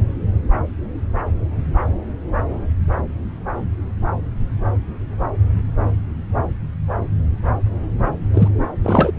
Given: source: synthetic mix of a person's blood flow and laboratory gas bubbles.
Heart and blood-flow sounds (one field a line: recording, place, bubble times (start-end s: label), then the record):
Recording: Doppler ultrasound of blood flow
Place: subclavian vein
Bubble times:
8.33-8.48 s: bubbles
8.83-9.12 s: bubbles
From the record:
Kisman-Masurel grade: 213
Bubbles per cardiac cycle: several, 3 to 8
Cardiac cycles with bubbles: 1 to 10%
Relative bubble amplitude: loud (0.450 to 0.775)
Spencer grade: 1 (occasional bubble signal discernible with the cardiac motion signal, with majority of cardiac periods free of bubbles)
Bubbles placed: anywhere in the cardiac cycle